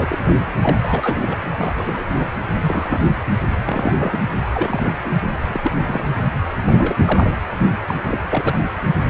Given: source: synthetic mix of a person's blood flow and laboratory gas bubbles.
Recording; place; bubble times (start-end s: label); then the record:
Doppler ultrasound of blood flow; precordium
0.00-0.36 s: bubbles
0.61-0.77 s: bubbles
0.81-1.37 s: bubbles
1.53-2.04 s: bubbles
2.17-2.28 s: bubbles
2.60-3.00 s: bubbles
3.65-3.94 s: bubbles
3.98-4.18 s: bubbles
4.52-4.94 s: bubbles
5.02-5.12 s: bubbles
5.47-5.60 s: bubbles
5.63-5.71 s: bubbles
5.85-6.02 s: bubbles
6.42-6.47 s: bubbles
6.64-6.96 s: bubbles
7.05-7.34 s: bubbles
7.87-8.20 s: bubbles
8.30-8.56 s: bubbles
From the record:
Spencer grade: 3 (all of the cardiac periods contain showers or single bubble signals, but not dominating or overriding the cardiac motion signals); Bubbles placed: anywhere in the cardiac cycle